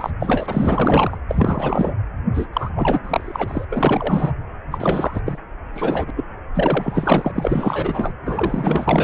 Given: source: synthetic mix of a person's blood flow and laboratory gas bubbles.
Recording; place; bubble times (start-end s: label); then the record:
Doppler ultrasound of blood flow; precordium
0.00-0.10 s: bubbles
0.20-1.18 s: bubbles
1.28-1.94 s: bubbles
2.34-2.47 s: bubbles
2.53-2.70 s: bubbles
2.75-3.00 s: bubbles
3.03-3.65 s: bubbles
3.70-4.32 s: bubbles
4.71-5.21 s: bubbles
5.26-5.38 s: bubbles
5.73-6.11 s: bubbles
6.15-6.24 s: bubbles
6.54-8.12 s: bubbles
8.25-9.04 s: bubbles
From the record:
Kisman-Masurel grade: 444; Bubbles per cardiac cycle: continuous sound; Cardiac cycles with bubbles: 100%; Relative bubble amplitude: maximal (0.775 to 0.999); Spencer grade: 4 (maximum detectable bubble signal sounding continuously throughout systole and diastole of every cardiac period, and overriding the amplitude of the normal cardiac signals); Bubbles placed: anywhere in the cardiac cycle